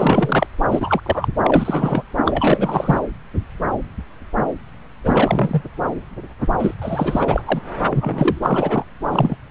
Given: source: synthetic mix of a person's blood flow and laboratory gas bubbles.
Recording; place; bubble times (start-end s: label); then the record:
Doppler ultrasound of blood flow; subclavian vein
0.00-0.47 s: bubbles
0.69-1.01 s: bubbles
1.06-1.28 s: bubbles
1.44-2.02 s: bubbles
2.25-2.99 s: bubbles
5.04-5.62 s: bubbles
6.59-6.74 s: bubbles
6.82-7.42 s: bubbles
7.45-7.61 s: bubbles
7.89-8.85 s: bubbles
9.11-9.36 s: bubbles
From the record:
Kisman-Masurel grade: 333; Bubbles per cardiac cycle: rolling drumbeat, 9 or more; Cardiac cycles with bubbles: 50 to 99%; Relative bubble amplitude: loud (0.450 to 0.775); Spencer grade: 3 (all of the cardiac periods contain showers or single bubble signals, but not dominating or overriding the cardiac motion signals); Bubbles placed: anywhere in the cardiac cycle